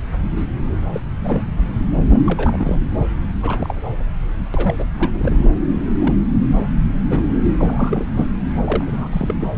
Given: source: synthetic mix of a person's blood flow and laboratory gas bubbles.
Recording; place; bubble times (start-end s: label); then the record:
Doppler ultrasound of blood flow; subclavian vein
0.36-0.45 s: bubbles
0.93-1.00 s: bubbles
1.23-1.42 s: bubbles
2.10-2.22 s: bubbles
2.25-2.81 s: bubbles
3.42-3.75 s: bubbles
4.54-4.75 s: bubbles
4.78-4.84 s: bubbles
4.99-5.50 s: bubbles
6.01-6.14 s: bubbles
6.49-6.53 s: bubbles
6.56-6.66 s: bubbles
7.10-7.29 s: bubbles
7.57-8.09 s: bubbles
8.15-8.28 s: bubbles
8.64-8.84 s: bubbles
8.87-9.09 s: bubbles
9.12-9.34 s: bubbles
9.41-9.48 s: bubbles
From the record:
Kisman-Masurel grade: 242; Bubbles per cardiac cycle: several, 3 to 8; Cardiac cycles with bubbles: 100%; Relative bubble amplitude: moderate (0.250 to 0.450); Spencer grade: 3 (all of the cardiac periods contain showers or single bubble signals, but not dominating or overriding the cardiac motion signals); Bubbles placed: anywhere in the cardiac cycle